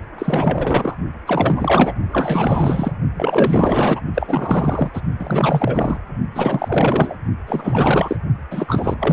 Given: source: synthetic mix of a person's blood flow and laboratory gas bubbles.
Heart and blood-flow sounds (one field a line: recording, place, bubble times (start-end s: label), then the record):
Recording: Doppler ultrasound of blood flow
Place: precordium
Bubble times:
0.18-0.96 s: bubbles
1.25-1.94 s: bubbles
2.11-2.92 s: bubbles
3.14-4.00 s: bubbles
4.13-4.89 s: bubbles
4.93-5.01 s: bubbles
5.19-6.01 s: bubbles
6.34-7.15 s: bubbles
7.47-8.16 s: bubbles
8.51-8.96 s: bubbles
8.99-9.13 s: bubbles
From the record:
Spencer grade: 4 (maximum detectable bubble signal sounding continuously throughout systole and diastole of every cardiac period, and overriding the amplitude of the normal cardiac signals)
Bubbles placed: only in the low amplitude regions of the cardiac cycle